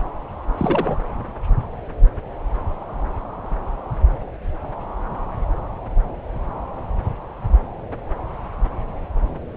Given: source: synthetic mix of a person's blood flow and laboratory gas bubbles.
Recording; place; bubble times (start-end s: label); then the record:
Doppler ultrasound of blood flow; subclavian vein
0.57-0.95 s: bubbles
From the record:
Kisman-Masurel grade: 212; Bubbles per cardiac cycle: several, 3 to 8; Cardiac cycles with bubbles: 1 to 10%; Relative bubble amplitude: moderate (0.250 to 0.450); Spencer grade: 1 (occasional bubble signal discernible with the cardiac motion signal, with majority of cardiac periods free of bubbles); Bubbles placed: anywhere in the cardiac cycle